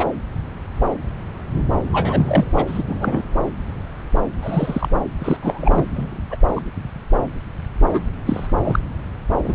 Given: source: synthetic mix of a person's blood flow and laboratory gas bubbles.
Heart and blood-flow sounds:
Doppler ultrasound of blood flow; subclavian vein
0.00-0.04 s: bubbles
1.91-2.46 s: bubbles
2.55-2.82 s: bubbles
2.88-3.27 s: bubbles
4.42-4.88 s: bubbles
5.18-5.37 s: bubbles
5.42-5.86 s: bubbles
5.96-6.18 s: bubbles
6.30-6.37 s: bubbles
6.56-6.61 s: bubbles
7.93-8.01 s: bubbles
8.26-8.47 s: bubbles
8.64-8.79 s: bubbles
9.44-9.55 s: bubbles
From the record:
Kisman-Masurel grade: 222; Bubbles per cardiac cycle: several, 3 to 8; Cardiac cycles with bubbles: 10 to 50%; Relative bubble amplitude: moderate (0.250 to 0.450); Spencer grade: 2 (many but less than half of the cardiac periods contain bubble signals, singularly or in groups); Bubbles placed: anywhere in the cardiac cycle

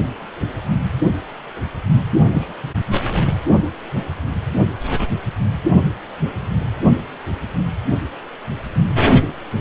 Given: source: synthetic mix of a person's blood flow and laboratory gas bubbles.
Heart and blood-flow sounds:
Doppler ultrasound of blood flow; precordium
2.33-2.54 s: bubbles
2.63-2.71 s: bubbles
From the record:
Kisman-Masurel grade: 112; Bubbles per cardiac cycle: 1 to 2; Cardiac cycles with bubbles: 1 to 10%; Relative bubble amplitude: moderate (0.250 to 0.450); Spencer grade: 1 (occasional bubble signal discernible with the cardiac motion signal, with majority of cardiac periods free of bubbles); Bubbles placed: only in the low amplitude regions of the cardiac cycle

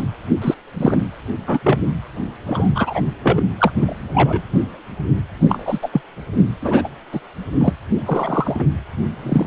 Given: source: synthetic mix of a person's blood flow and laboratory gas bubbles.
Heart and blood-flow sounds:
Doppler ultrasound of blood flow; precordium
0.00-0.04 s: bubbles
0.42-0.54 s: bubbles
0.77-0.98 s: bubbles
1.47-1.59 s: bubbles
1.63-1.78 s: bubbles
2.47-3.01 s: bubbles
3.23-3.42 s: bubbles
3.58-3.72 s: bubbles
3.80-3.96 s: bubbles
4.14-4.42 s: bubbles
5.49-5.79 s: bubbles
5.82-5.89 s: bubbles
5.92-6.01 s: bubbles
6.62-6.88 s: bubbles
7.12-7.20 s: bubbles
7.59-7.73 s: bubbles
8.05-8.63 s: bubbles
9.23-9.46 s: bubbles
From the record:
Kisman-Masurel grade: 233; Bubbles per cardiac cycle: several, 3 to 8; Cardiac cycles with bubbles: 50 to 99%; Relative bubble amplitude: loud (0.450 to 0.775); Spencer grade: 3 (all of the cardiac periods contain showers or single bubble signals, but not dominating or overriding the cardiac motion signals); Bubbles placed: anywhere in the cardiac cycle

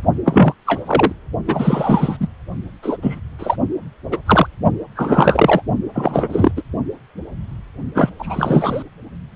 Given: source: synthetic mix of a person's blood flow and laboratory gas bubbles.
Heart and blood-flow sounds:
Doppler ultrasound of blood flow; precordium
0.25-0.54 s: bubbles
0.66-0.81 s: bubbles
0.86-1.12 s: bubbles
1.48-2.17 s: bubbles
2.20-2.27 s: bubbles
2.83-2.97 s: bubbles
3.02-3.21 s: bubbles
3.39-3.56 s: bubbles
4.12-4.18 s: bubbles
4.26-4.47 s: bubbles
4.96-5.62 s: bubbles
5.93-6.51 s: bubbles
6.56-6.62 s: bubbles
7.95-8.10 s: bubbles
8.19-8.82 s: bubbles
From the record:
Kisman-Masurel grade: 233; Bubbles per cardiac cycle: several, 3 to 8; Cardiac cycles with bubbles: 50 to 99%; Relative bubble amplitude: loud (0.450 to 0.775); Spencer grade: 3 (all of the cardiac periods contain showers or single bubble signals, but not dominating or overriding the cardiac motion signals); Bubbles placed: only in the low amplitude regions of the cardiac cycle

